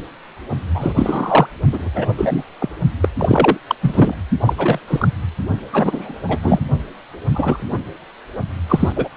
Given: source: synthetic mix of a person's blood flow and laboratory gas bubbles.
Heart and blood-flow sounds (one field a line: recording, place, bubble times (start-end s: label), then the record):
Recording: Doppler ultrasound of blood flow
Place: precordium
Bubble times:
0.74-0.93 s: bubbles
0.95-1.46 s: bubbles
1.73-1.90 s: bubbles
1.94-2.14 s: bubbles
2.18-2.44 s: bubbles
2.60-2.69 s: bubbles
3.01-3.10 s: bubbles
3.19-3.58 s: bubbles
3.67-3.76 s: bubbles
3.81-4.15 s: bubbles
4.41-4.53 s: bubbles
4.57-4.79 s: bubbles
4.88-5.08 s: bubbles
5.72-6.14 s: bubbles
6.28-6.38 s: bubbles
6.42-6.59 s: bubbles
7.29-7.66 s: bubbles
7.69-7.78 s: bubbles
8.69-8.93 s: bubbles
8.96-9.09 s: bubbles
From the record:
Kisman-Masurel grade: 243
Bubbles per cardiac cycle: several, 3 to 8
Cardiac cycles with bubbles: 100%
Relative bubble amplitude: loud (0.450 to 0.775)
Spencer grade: 3 (all of the cardiac periods contain showers or single bubble signals, but not dominating or overriding the cardiac motion signals)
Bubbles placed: only in the low amplitude regions of the cardiac cycle